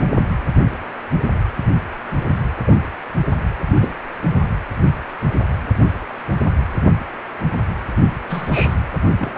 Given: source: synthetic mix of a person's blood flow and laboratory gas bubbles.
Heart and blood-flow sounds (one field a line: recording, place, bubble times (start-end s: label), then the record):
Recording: Doppler ultrasound of blood flow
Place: precordium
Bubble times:
1.58-1.63 s: bubbles
2.67-2.76 s: bubbles
3.74-3.96 s: bubbles
8.29-8.75 s: bubbles
9.18-9.38 s: bubbles
From the record:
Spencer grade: 2 (many but less than half of the cardiac periods contain bubble signals, singularly or in groups)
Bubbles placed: anywhere in the cardiac cycle